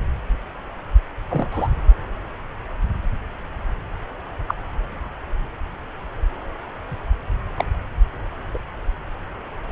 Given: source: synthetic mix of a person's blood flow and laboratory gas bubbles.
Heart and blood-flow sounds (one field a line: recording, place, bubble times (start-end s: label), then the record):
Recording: Doppler ultrasound of blood flow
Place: subclavian vein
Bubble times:
1.28-1.48 s: bubbles
1.51-1.69 s: bubbles
4.48-4.55 s: bubbles
7.57-7.65 s: bubbles
8.54-8.59 s: bubbles
From the record:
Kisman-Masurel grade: 122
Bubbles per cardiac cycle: 1 to 2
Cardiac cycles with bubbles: 10 to 50%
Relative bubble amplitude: moderate (0.250 to 0.450)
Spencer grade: 2 (many but less than half of the cardiac periods contain bubble signals, singularly or in groups)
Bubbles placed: anywhere in the cardiac cycle